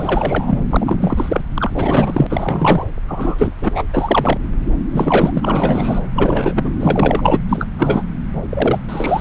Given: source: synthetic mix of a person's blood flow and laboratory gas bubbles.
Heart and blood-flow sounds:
Doppler ultrasound of blood flow; subclavian vein
0.00-0.58 s: bubbles
0.71-0.97 s: bubbles
1.00-1.41 s: bubbles
1.54-1.71 s: bubbles
1.75-2.27 s: bubbles
2.29-2.88 s: bubbles
3.08-3.52 s: bubbles
3.61-3.82 s: bubbles
3.93-4.37 s: bubbles
4.92-5.31 s: bubbles
5.33-5.99 s: bubbles
6.14-6.73 s: bubbles
6.80-7.39 s: bubbles
7.48-7.69 s: bubbles
7.78-8.03 s: bubbles
8.50-8.79 s: bubbles
8.88-9.21 s: bubbles
From the record:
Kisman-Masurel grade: 343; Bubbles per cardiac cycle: rolling drumbeat, 9 or more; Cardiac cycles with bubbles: 100%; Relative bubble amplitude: loud (0.450 to 0.775); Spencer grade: 3 (all of the cardiac periods contain showers or single bubble signals, but not dominating or overriding the cardiac motion signals); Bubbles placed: anywhere in the cardiac cycle

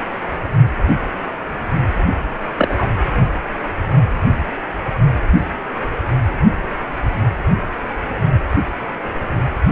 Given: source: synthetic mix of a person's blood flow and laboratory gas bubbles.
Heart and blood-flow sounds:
Doppler ultrasound of blood flow; precordium
2.56-2.88 s: bubbles
From the record:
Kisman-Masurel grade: 212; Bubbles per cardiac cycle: several, 3 to 8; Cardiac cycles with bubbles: 1 to 10%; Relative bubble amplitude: moderate (0.250 to 0.450); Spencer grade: 1 (occasional bubble signal discernible with the cardiac motion signal, with majority of cardiac periods free of bubbles); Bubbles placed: anywhere in the cardiac cycle

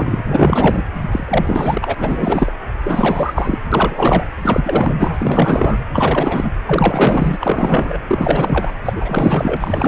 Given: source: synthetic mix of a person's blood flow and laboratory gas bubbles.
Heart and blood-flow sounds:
Doppler ultrasound of blood flow; precordium
0.00-0.83 s: bubbles
1.11-1.95 s: bubbles
1.98-2.52 s: bubbles
2.84-3.61 s: bubbles
3.72-4.24 s: bubbles
4.42-4.94 s: bubbles
4.98-5.79 s: bubbles
5.92-6.51 s: bubbles
6.67-7.37 s: bubbles
7.40-7.99 s: bubbles
8.08-8.73 s: bubbles
8.85-8.93 s: bubbles
8.96-9.57 s: bubbles
9.60-9.88 s: bubbles
From the record:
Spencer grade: 4 (maximum detectable bubble signal sounding continuously throughout systole and diastole of every cardiac period, and overriding the amplitude of the normal cardiac signals); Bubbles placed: anywhere in the cardiac cycle

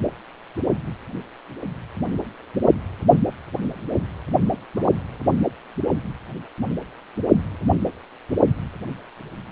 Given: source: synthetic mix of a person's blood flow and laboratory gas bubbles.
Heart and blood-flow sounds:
Doppler ultrasound of blood flow; precordium
4.76-4.89 s: bubbles
From the record:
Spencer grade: 1 (occasional bubble signal discernible with the cardiac motion signal, with majority of cardiac periods free of bubbles); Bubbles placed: only in the low amplitude regions of the cardiac cycle

